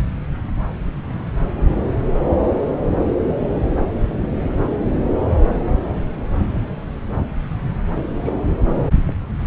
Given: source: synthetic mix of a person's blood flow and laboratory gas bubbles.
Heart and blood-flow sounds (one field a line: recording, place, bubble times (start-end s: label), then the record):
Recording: Doppler ultrasound of blood flow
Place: subclavian vein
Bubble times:
8.24-8.39 s: bubbles
From the record:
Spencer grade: 1 (occasional bubble signal discernible with the cardiac motion signal, with majority of cardiac periods free of bubbles)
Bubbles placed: anywhere in the cardiac cycle